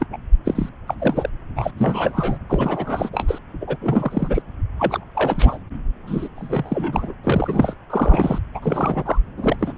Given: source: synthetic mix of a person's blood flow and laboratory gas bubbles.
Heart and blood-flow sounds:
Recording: Doppler ultrasound of blood flow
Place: subclavian vein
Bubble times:
0.00-0.06 s: bubbles
0.12-0.17 s: bubbles
0.45-0.69 s: bubbles
0.87-0.94 s: bubbles
0.98-1.30 s: bubbles
1.56-1.71 s: bubbles
1.77-2.38 s: bubbles
2.48-3.10 s: bubbles
3.12-3.39 s: bubbles
3.61-3.77 s: bubbles
3.81-4.42 s: bubbles
4.77-5.04 s: bubbles
5.15-5.58 s: bubbles
6.07-6.28 s: bubbles
6.36-7.14 s: bubbles
7.24-7.75 s: bubbles
7.89-8.38 s: bubbles
8.54-9.19 s: bubbles
9.37-9.55 s: bubbles
9.59-9.73 s: bubbles
From the record:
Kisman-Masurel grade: 342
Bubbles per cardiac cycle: rolling drumbeat, 9 or more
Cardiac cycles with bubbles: 100%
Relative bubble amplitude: moderate (0.250 to 0.450)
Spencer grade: 3 (all of the cardiac periods contain showers or single bubble signals, but not dominating or overriding the cardiac motion signals)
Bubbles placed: anywhere in the cardiac cycle

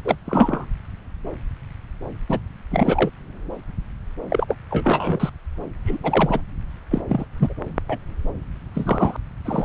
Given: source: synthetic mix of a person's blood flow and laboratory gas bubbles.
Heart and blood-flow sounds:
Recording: Doppler ultrasound of blood flow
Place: subclavian vein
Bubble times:
0.04-0.15 s: bubbles
0.26-0.66 s: bubbles
2.29-2.41 s: bubbles
2.71-3.10 s: bubbles
4.29-4.56 s: bubbles
4.71-5.29 s: bubbles
5.85-5.97 s: bubbles
6.03-6.41 s: bubbles
6.90-7.01 s: bubbles
7.09-7.25 s: bubbles
7.38-7.54 s: bubbles
7.88-7.97 s: bubbles
8.74-9.16 s: bubbles
9.45-9.65 s: bubbles
From the record:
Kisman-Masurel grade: 233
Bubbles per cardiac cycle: several, 3 to 8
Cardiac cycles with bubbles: 50 to 99%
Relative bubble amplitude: loud (0.450 to 0.775)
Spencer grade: 3 (all of the cardiac periods contain showers or single bubble signals, but not dominating or overriding the cardiac motion signals)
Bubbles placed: anywhere in the cardiac cycle

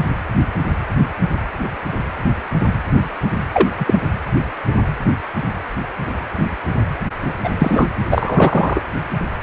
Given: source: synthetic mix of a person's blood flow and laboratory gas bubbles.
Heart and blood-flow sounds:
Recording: Doppler ultrasound of blood flow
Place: precordium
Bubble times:
3.52-3.70 s: bubbles
3.79-4.01 s: bubbles
7.43-7.49 s: bubbles
7.59-7.87 s: bubbles
8.11-8.81 s: bubbles
From the record:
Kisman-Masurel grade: 223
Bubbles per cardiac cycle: several, 3 to 8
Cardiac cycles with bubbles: 10 to 50%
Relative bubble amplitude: loud (0.450 to 0.775)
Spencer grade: 2 (many but less than half of the cardiac periods contain bubble signals, singularly or in groups)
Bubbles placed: anywhere in the cardiac cycle

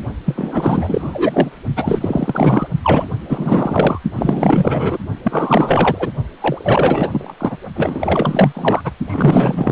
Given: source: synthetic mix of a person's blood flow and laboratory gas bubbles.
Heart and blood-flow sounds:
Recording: Doppler ultrasound of blood flow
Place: precordium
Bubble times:
0.26-1.61 s: bubbles
1.76-2.67 s: bubbles
2.83-3.07 s: bubbles
3.29-4.00 s: bubbles
4.16-4.99 s: bubbles
5.24-6.12 s: bubbles
6.39-7.34 s: bubbles
7.40-7.57 s: bubbles
7.76-8.52 s: bubbles
8.54-8.81 s: bubbles
8.84-8.91 s: bubbles
9.07-9.72 s: bubbles
From the record:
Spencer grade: 4 (maximum detectable bubble signal sounding continuously throughout systole and diastole of every cardiac period, and overriding the amplitude of the normal cardiac signals)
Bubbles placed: only in the low amplitude regions of the cardiac cycle

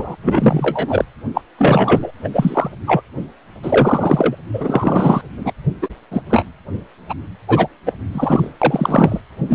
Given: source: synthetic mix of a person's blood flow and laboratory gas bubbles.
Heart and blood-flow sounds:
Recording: Doppler ultrasound of blood flow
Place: precordium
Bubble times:
0.00-0.15 s: bubbles
0.22-1.05 s: bubbles
1.34-1.42 s: bubbles
1.58-2.11 s: bubbles
2.23-2.29 s: bubbles
2.33-2.70 s: bubbles
2.87-3.02 s: bubbles
3.62-4.36 s: bubbles
4.54-5.21 s: bubbles
5.37-5.52 s: bubbles
5.82-5.88 s: bubbles
6.11-6.22 s: bubbles
6.29-6.43 s: bubbles
7.09-7.14 s: bubbles
7.47-7.68 s: bubbles
7.86-7.93 s: bubbles
8.12-8.50 s: bubbles
8.62-9.21 s: bubbles
9.48-9.55 s: bubbles
From the record:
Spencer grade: 3 (all of the cardiac periods contain showers or single bubble signals, but not dominating or overriding the cardiac motion signals)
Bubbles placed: anywhere in the cardiac cycle

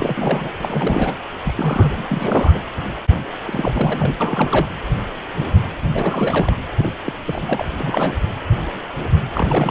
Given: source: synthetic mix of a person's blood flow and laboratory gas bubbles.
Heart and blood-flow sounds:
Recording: Doppler ultrasound of blood flow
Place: precordium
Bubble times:
0.00-0.49 s: bubbles
0.60-1.19 s: bubbles
1.44-2.06 s: bubbles
2.09-2.62 s: bubbles
3.46-4.15 s: bubbles
4.20-4.67 s: bubbles
5.93-6.57 s: bubbles
6.77-6.92 s: bubbles
7.04-7.12 s: bubbles
7.24-7.66 s: bubbles
7.79-8.15 s: bubbles
9.33-9.71 s: bubbles
From the record:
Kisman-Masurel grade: 332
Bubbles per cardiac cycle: rolling drumbeat, 9 or more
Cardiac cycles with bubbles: 50 to 99%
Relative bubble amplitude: moderate (0.250 to 0.450)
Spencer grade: 3 (all of the cardiac periods contain showers or single bubble signals, but not dominating or overriding the cardiac motion signals)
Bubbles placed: anywhere in the cardiac cycle

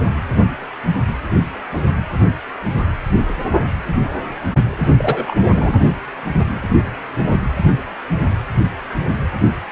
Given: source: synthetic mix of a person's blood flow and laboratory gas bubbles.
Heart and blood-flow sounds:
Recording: Doppler ultrasound of blood flow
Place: precordium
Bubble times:
4.98-5.36 s: bubbles
5.49-5.73 s: bubbles
From the record:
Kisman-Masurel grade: 212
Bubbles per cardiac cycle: several, 3 to 8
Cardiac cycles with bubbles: 1 to 10%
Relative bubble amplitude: moderate (0.250 to 0.450)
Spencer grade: 1 (occasional bubble signal discernible with the cardiac motion signal, with majority of cardiac periods free of bubbles)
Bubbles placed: anywhere in the cardiac cycle

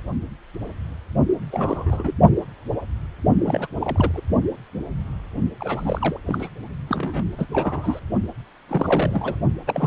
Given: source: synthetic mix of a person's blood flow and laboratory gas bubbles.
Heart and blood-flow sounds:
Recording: Doppler ultrasound of blood flow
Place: precordium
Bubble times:
1.52-2.14 s: bubbles
3.45-3.67 s: bubbles
3.81-4.11 s: bubbles
4.13-4.21 s: bubbles
5.60-6.20 s: bubbles
6.27-6.50 s: bubbles
6.88-7.24 s: bubbles
7.38-7.46 s: bubbles
7.53-8.00 s: bubbles
8.68-9.40 s: bubbles
9.67-9.87 s: bubbles
From the record:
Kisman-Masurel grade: 332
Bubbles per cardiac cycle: rolling drumbeat, 9 or more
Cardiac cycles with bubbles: 50 to 99%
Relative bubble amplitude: moderate (0.250 to 0.450)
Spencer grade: 3 (all of the cardiac periods contain showers or single bubble signals, but not dominating or overriding the cardiac motion signals)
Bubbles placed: only in the low amplitude regions of the cardiac cycle

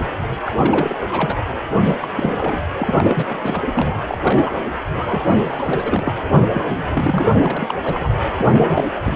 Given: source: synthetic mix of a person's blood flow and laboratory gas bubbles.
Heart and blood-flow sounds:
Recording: Doppler ultrasound of blood flow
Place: precordium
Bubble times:
0.45-0.54 s: bubbles
0.56-0.94 s: bubbles
1.11-1.35 s: bubbles
1.82-2.60 s: bubbles
2.78-3.64 s: bubbles
3.73-4.02 s: bubbles
4.07-4.18 s: bubbles
4.22-4.51 s: bubbles
4.92-6.14 s: bubbles
6.35-6.43 s: bubbles
6.53-7.23 s: bubbles
7.29-7.74 s: bubbles
7.83-8.13 s: bubbles
8.37-8.99 s: bubbles
9.04-9.16 s: bubbles
From the record:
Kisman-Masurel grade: 342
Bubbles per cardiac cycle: rolling drumbeat, 9 or more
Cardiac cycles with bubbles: 100%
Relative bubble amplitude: moderate (0.250 to 0.450)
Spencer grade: 3 (all of the cardiac periods contain showers or single bubble signals, but not dominating or overriding the cardiac motion signals)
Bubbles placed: anywhere in the cardiac cycle

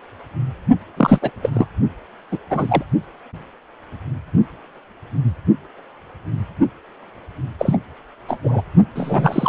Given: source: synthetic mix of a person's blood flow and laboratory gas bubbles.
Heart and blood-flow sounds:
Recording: Doppler ultrasound of blood flow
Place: precordium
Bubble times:
0.97-1.19 s: bubbles
1.22-1.30 s: bubbles
1.42-1.50 s: bubbles
1.53-1.67 s: bubbles
2.31-2.38 s: bubbles
2.50-2.83 s: bubbles
7.59-7.78 s: bubbles
8.28-8.38 s: bubbles
8.44-8.61 s: bubbles
8.95-9.49 s: bubbles
From the record:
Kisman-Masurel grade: 223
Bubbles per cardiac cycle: several, 3 to 8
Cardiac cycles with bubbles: 10 to 50%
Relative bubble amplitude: loud (0.450 to 0.775)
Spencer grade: 2 (many but less than half of the cardiac periods contain bubble signals, singularly or in groups)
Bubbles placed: only in the low amplitude regions of the cardiac cycle

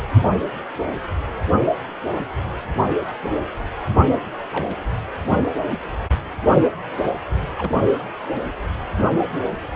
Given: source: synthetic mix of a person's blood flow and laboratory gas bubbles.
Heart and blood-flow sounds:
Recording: Doppler ultrasound of blood flow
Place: precordium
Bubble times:
4.52-4.75 s: bubbles
7.57-7.71 s: bubbles
From the record:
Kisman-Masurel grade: 111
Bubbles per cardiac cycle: 1 to 2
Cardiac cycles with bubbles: 1 to 10%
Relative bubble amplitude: barely perceptible (0.100 to 0.250)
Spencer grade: 1 (occasional bubble signal discernible with the cardiac motion signal, with majority of cardiac periods free of bubbles)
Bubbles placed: anywhere in the cardiac cycle

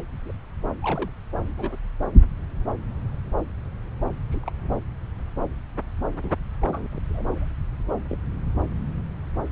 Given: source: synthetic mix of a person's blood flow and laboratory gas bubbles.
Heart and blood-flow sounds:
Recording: Doppler ultrasound of blood flow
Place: subclavian vein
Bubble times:
0.22-0.31 s: bubbles
0.82-1.10 s: bubbles
1.48-1.54 s: bubbles
1.58-1.76 s: bubbles
4.32-4.40 s: bubbles
4.42-4.50 s: bubbles
6.15-6.33 s: bubbles
6.61-6.88 s: bubbles
6.92-7.00 s: bubbles
7.09-7.45 s: bubbles
8.09-8.17 s: bubbles
From the record:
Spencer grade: 2 (many but less than half of the cardiac periods contain bubble signals, singularly or in groups)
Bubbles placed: anywhere in the cardiac cycle

